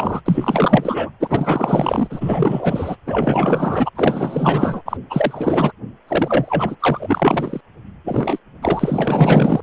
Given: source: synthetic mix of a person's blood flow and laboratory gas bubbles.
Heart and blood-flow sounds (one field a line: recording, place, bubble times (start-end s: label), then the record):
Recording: Doppler ultrasound of blood flow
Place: precordium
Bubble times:
0.00-0.21 s: bubbles
0.25-1.10 s: bubbles
1.20-2.96 s: bubbles
3.06-3.90 s: bubbles
3.95-4.97 s: bubbles
5.09-5.72 s: bubbles
6.07-6.75 s: bubbles
6.80-7.61 s: bubbles
8.04-8.39 s: bubbles
8.62-9.61 s: bubbles
From the record:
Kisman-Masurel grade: 444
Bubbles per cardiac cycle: continuous sound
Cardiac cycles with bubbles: 100%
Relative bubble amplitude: maximal (0.775 to 0.999)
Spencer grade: 4 (maximum detectable bubble signal sounding continuously throughout systole and diastole of every cardiac period, and overriding the amplitude of the normal cardiac signals)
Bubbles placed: anywhere in the cardiac cycle